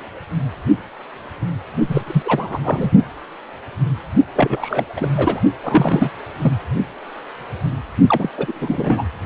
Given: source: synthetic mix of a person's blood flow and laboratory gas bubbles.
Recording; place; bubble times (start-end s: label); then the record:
Doppler ultrasound of blood flow; precordium
1.89-2.04 s: bubbles
2.06-2.23 s: bubbles
2.25-2.59 s: bubbles
2.64-2.91 s: bubbles
4.35-4.86 s: bubbles
4.96-5.09 s: bubbles
5.17-5.41 s: bubbles
5.63-6.10 s: bubbles
6.41-6.53 s: bubbles
8.08-8.29 s: bubbles
8.38-9.03 s: bubbles
From the record:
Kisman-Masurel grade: 333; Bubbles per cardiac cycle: rolling drumbeat, 9 or more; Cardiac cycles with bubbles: 50 to 99%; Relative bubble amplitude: loud (0.450 to 0.775); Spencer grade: 3 (all of the cardiac periods contain showers or single bubble signals, but not dominating or overriding the cardiac motion signals); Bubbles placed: only in the low amplitude regions of the cardiac cycle